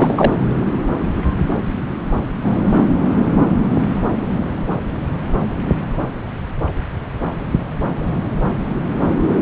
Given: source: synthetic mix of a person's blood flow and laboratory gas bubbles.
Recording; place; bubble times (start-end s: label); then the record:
Doppler ultrasound of blood flow; subclavian vein
0.00-0.34 s: bubbles
From the record:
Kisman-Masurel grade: 213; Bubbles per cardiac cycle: several, 3 to 8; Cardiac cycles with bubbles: 1 to 10%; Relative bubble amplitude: loud (0.450 to 0.775); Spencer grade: 1 (occasional bubble signal discernible with the cardiac motion signal, with majority of cardiac periods free of bubbles); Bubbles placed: anywhere in the cardiac cycle